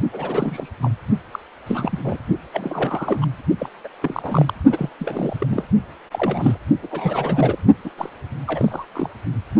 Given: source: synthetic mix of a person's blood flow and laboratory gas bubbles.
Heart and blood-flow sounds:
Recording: Doppler ultrasound of blood flow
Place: precordium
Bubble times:
0.12-0.69 s: bubbles
0.81-0.92 s: bubbles
1.32-1.39 s: bubbles
1.66-1.99 s: bubbles
2.04-2.17 s: bubbles
2.54-3.25 s: bubbles
3.58-3.69 s: bubbles
3.84-3.88 s: bubbles
4.02-4.54 s: bubbles
4.70-4.89 s: bubbles
5.00-5.37 s: bubbles
5.40-5.64 s: bubbles
6.11-6.59 s: bubbles
6.83-6.88 s: bubbles
6.91-7.58 s: bubbles
7.84-7.91 s: bubbles
7.98-8.10 s: bubbles
8.48-8.86 s: bubbles
8.95-9.09 s: bubbles
From the record:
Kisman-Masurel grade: 342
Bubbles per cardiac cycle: rolling drumbeat, 9 or more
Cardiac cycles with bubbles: 100%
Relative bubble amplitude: moderate (0.250 to 0.450)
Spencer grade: 3 (all of the cardiac periods contain showers or single bubble signals, but not dominating or overriding the cardiac motion signals)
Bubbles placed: only in the low amplitude regions of the cardiac cycle

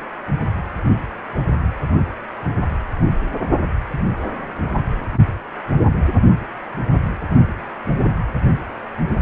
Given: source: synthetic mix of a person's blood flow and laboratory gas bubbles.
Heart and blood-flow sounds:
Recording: Doppler ultrasound of blood flow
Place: precordium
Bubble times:
no bubbles
From the record:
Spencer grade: 0 (complete lack of bubble signals)

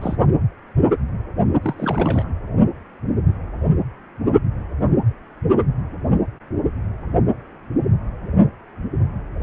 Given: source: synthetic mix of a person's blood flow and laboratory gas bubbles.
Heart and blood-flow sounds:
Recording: Doppler ultrasound of blood flow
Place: precordium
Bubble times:
0.01-0.16 s: bubbles
1.62-2.29 s: bubbles
From the record:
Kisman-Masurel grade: 221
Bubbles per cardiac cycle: several, 3 to 8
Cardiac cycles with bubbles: 10 to 50%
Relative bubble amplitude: barely perceptible (0.100 to 0.250)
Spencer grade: 2 (many but less than half of the cardiac periods contain bubble signals, singularly or in groups)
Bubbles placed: only in the low amplitude regions of the cardiac cycle

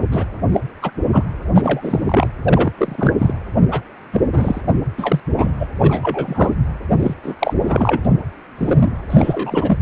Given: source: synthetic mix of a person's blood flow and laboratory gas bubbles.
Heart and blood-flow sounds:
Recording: Doppler ultrasound of blood flow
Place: precordium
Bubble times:
0.11-0.25 s: bubbles
0.52-0.60 s: bubbles
0.82-0.91 s: bubbles
1.11-1.24 s: bubbles
1.54-2.27 s: bubbles
2.45-2.73 s: bubbles
2.77-3.12 s: bubbles
3.18-3.33 s: bubbles
3.71-3.81 s: bubbles
4.13-4.21 s: bubbles
4.33-4.61 s: bubbles
4.98-5.20 s: bubbles
5.38-5.52 s: bubbles
5.60-5.67 s: bubbles
5.80-6.55 s: bubbles
6.99-7.14 s: bubbles
7.23-7.36 s: bubbles
7.39-7.54 s: bubbles
7.61-8.01 s: bubbles
8.04-8.07 s: bubbles
8.57-8.92 s: bubbles
9.10-9.78 s: bubbles
From the record:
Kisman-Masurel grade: 233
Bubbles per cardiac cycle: several, 3 to 8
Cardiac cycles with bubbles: 50 to 99%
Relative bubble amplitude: loud (0.450 to 0.775)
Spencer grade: 3 (all of the cardiac periods contain showers or single bubble signals, but not dominating or overriding the cardiac motion signals)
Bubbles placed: anywhere in the cardiac cycle

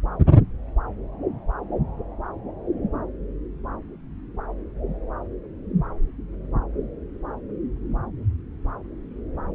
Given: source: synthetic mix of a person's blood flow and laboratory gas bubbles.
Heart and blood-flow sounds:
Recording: Doppler ultrasound of blood flow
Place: subclavian vein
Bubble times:
no bubbles
From the record:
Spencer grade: 0 (complete lack of bubble signals)

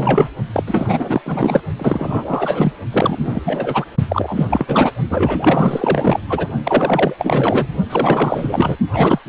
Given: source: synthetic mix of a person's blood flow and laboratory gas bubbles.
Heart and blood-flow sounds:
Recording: Doppler ultrasound of blood flow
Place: precordium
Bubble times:
0.00-0.28 s: bubbles
0.53-0.64 s: bubbles
0.67-1.22 s: bubbles
1.26-1.61 s: bubbles
1.79-2.73 s: bubbles
2.91-3.42 s: bubbles
3.46-3.85 s: bubbles
4.08-4.92 s: bubbles
5.09-6.20 s: bubbles
6.28-6.47 s: bubbles
6.63-7.16 s: bubbles
7.18-7.67 s: bubbles
7.90-8.77 s: bubbles
8.93-9.19 s: bubbles
9.26-9.29 s: bubbles
From the record:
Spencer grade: 4 (maximum detectable bubble signal sounding continuously throughout systole and diastole of every cardiac period, and overriding the amplitude of the normal cardiac signals)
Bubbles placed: only in the low amplitude regions of the cardiac cycle

